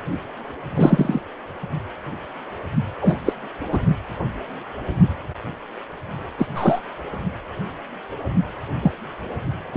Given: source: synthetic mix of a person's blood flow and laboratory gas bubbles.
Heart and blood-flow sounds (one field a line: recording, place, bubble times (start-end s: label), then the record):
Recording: Doppler ultrasound of blood flow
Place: precordium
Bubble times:
0.76-1.21 s: bubbles
3.02-3.19 s: bubbles
3.25-3.33 s: bubbles
3.72-3.79 s: bubbles
6.38-6.47 s: bubbles
6.55-6.81 s: bubbles
8.82-8.92 s: bubbles
9.73-9.77 s: bubbles
From the record:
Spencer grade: 2 (many but less than half of the cardiac periods contain bubble signals, singularly or in groups)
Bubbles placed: only in the low amplitude regions of the cardiac cycle